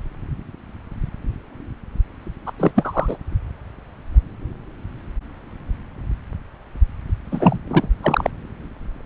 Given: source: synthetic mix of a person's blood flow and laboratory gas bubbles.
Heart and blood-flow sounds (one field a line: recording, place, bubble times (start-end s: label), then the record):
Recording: Doppler ultrasound of blood flow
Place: subclavian vein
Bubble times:
2.46-2.52 s: bubbles
2.58-2.71 s: bubbles
2.75-3.17 s: bubbles
7.31-7.58 s: bubbles
7.67-7.88 s: bubbles
8.03-8.30 s: bubbles
From the record:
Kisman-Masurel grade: 223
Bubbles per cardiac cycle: several, 3 to 8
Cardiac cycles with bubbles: 10 to 50%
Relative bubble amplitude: loud (0.450 to 0.775)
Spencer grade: 2 (many but less than half of the cardiac periods contain bubble signals, singularly or in groups)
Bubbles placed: anywhere in the cardiac cycle